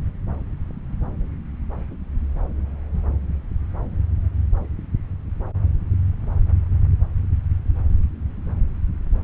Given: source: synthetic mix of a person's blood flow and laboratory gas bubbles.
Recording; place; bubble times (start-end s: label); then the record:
Doppler ultrasound of blood flow; subclavian vein
no bubbles
From the record:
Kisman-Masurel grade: 000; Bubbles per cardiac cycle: 0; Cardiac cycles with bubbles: 0%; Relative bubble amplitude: no bubbles discernible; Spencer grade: 0 (complete lack of bubble signals)